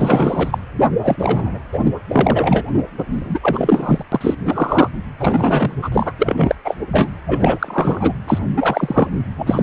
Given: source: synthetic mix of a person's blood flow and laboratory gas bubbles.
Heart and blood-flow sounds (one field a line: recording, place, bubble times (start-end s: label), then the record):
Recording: Doppler ultrasound of blood flow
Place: precordium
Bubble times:
0.00-0.58 s: bubbles
0.78-0.88 s: bubbles
1.02-1.58 s: bubbles
1.73-1.91 s: bubbles
2.08-2.64 s: bubbles
2.98-3.04 s: bubbles
3.10-3.39 s: bubbles
3.42-4.04 s: bubbles
4.12-4.35 s: bubbles
4.46-4.89 s: bubbles
5.20-5.75 s: bubbles
5.82-5.89 s: bubbles
5.92-6.12 s: bubbles
6.19-6.56 s: bubbles
6.65-6.75 s: bubbles
6.93-7.09 s: bubbles
7.27-8.12 s: bubbles
8.27-8.39 s: bubbles
8.56-9.09 s: bubbles
9.37-9.63 s: bubbles
From the record:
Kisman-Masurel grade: 343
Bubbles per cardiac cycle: rolling drumbeat, 9 or more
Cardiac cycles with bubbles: 100%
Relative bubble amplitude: loud (0.450 to 0.775)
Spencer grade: 3 (all of the cardiac periods contain showers or single bubble signals, but not dominating or overriding the cardiac motion signals)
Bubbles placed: anywhere in the cardiac cycle